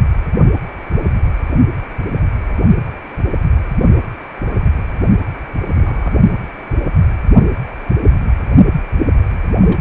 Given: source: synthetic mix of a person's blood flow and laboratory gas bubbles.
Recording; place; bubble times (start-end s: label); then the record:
Doppler ultrasound of blood flow; precordium
5.73-6.13 s: bubbles
9.62-9.81 s: bubbles
From the record:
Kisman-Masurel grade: 121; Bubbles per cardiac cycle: 1 to 2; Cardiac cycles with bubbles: 10 to 50%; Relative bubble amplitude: barely perceptible (0.100 to 0.250); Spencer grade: 2 (many but less than half of the cardiac periods contain bubble signals, singularly or in groups); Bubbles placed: only in the low amplitude regions of the cardiac cycle